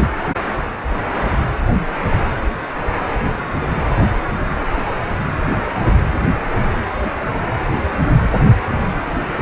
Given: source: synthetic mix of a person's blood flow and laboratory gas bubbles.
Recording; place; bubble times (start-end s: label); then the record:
Doppler ultrasound of blood flow; precordium
8.62-8.68 s: bubbles
From the record:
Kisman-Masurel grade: 111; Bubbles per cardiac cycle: 1 to 2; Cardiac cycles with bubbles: 1 to 10%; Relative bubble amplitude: barely perceptible (0.100 to 0.250); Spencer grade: 1 (occasional bubble signal discernible with the cardiac motion signal, with majority of cardiac periods free of bubbles); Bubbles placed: anywhere in the cardiac cycle